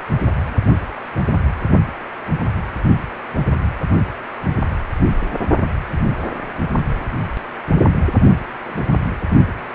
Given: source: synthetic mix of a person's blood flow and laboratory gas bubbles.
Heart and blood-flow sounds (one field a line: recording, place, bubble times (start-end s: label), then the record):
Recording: Doppler ultrasound of blood flow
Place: precordium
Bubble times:
0.26-0.33 s: bubbles
0.46-0.52 s: bubbles
0.91-0.95 s: bubbles
8.68-8.86 s: bubbles
From the record:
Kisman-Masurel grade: 121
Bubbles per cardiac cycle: 1 to 2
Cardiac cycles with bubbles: 10 to 50%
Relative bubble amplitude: barely perceptible (0.100 to 0.250)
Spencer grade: 2 (many but less than half of the cardiac periods contain bubble signals, singularly or in groups)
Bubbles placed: only in the low amplitude regions of the cardiac cycle